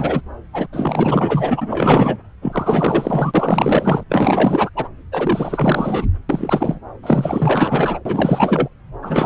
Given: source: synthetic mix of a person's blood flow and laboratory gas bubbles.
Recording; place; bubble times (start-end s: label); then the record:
Doppler ultrasound of blood flow; subclavian vein
0.00-0.21 s: bubbles
0.53-0.66 s: bubbles
0.72-2.18 s: bubbles
2.42-4.04 s: bubbles
4.09-4.70 s: bubbles
4.76-4.88 s: bubbles
5.12-6.06 s: bubbles
6.29-6.80 s: bubbles
7.03-8.00 s: bubbles
8.05-8.68 s: bubbles
9.02-9.26 s: bubbles
From the record:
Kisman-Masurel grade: 444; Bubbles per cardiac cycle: continuous sound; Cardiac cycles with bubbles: 100%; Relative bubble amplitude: maximal (0.775 to 0.999); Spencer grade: 4 (maximum detectable bubble signal sounding continuously throughout systole and diastole of every cardiac period, and overriding the amplitude of the normal cardiac signals); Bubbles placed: anywhere in the cardiac cycle